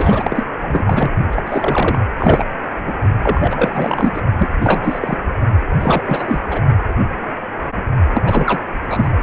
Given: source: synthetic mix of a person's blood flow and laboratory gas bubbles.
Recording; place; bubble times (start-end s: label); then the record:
Doppler ultrasound of blood flow; precordium
0.00-0.44 s: bubbles
0.60-1.11 s: bubbles
1.31-1.43 s: bubbles
1.46-1.99 s: bubbles
2.17-2.43 s: bubbles
2.84-2.93 s: bubbles
3.23-4.21 s: bubbles
4.38-4.47 s: bubbles
4.60-5.17 s: bubbles
5.79-6.39 s: bubbles
6.50-6.61 s: bubbles
8.13-8.22 s: bubbles
8.25-8.61 s: bubbles
8.83-9.10 s: bubbles
From the record:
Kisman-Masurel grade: 333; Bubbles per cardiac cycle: rolling drumbeat, 9 or more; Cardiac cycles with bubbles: 50 to 99%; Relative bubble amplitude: loud (0.450 to 0.775); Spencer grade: 3 (all of the cardiac periods contain showers or single bubble signals, but not dominating or overriding the cardiac motion signals); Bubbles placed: only in the low amplitude regions of the cardiac cycle